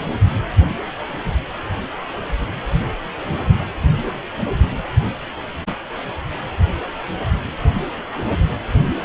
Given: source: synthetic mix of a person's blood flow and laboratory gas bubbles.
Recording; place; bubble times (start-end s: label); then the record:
Doppler ultrasound of blood flow; precordium
no bubbles
From the record:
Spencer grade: 0 (complete lack of bubble signals)